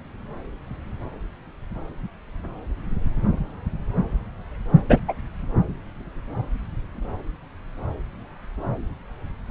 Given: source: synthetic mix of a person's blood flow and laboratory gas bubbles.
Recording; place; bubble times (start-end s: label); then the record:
Doppler ultrasound of blood flow; subclavian vein
4.88-5.02 s: bubbles
5.08-5.14 s: bubbles
From the record:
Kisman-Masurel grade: 223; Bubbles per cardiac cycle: several, 3 to 8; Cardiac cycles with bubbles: 10 to 50%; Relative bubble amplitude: loud (0.450 to 0.775); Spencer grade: 2 (many but less than half of the cardiac periods contain bubble signals, singularly or in groups); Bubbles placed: anywhere in the cardiac cycle